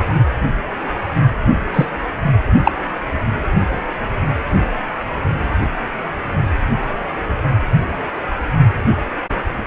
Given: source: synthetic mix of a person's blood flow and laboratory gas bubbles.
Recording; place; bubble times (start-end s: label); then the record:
Doppler ultrasound of blood flow; precordium
1.74-1.85 s: bubbles
2.63-2.71 s: bubbles
From the record:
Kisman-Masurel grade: 113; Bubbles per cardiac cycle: 1 to 2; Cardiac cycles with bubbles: 1 to 10%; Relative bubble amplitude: loud (0.450 to 0.775); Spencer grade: 1 (occasional bubble signal discernible with the cardiac motion signal, with majority of cardiac periods free of bubbles); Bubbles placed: anywhere in the cardiac cycle